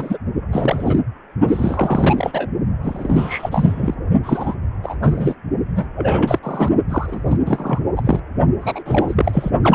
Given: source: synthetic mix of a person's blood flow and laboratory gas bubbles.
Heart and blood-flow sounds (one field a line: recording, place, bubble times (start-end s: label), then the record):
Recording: Doppler ultrasound of blood flow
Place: precordium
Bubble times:
0.00-0.18 s: bubbles
0.52-0.99 s: bubbles
1.47-2.51 s: bubbles
2.83-3.94 s: bubbles
4.23-4.55 s: bubbles
4.83-4.96 s: bubbles
5.02-5.35 s: bubbles
5.75-5.87 s: bubbles
5.96-6.39 s: bubbles
6.43-6.69 s: bubbles
6.89-7.38 s: bubbles
7.46-7.81 s: bubbles
7.96-8.20 s: bubbles
8.61-8.83 s: bubbles
8.86-9.50 s: bubbles
9.62-9.75 s: bubbles
From the record:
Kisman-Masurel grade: 342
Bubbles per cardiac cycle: rolling drumbeat, 9 or more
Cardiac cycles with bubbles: 100%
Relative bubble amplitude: moderate (0.250 to 0.450)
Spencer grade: 3 (all of the cardiac periods contain showers or single bubble signals, but not dominating or overriding the cardiac motion signals)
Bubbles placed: only in the low amplitude regions of the cardiac cycle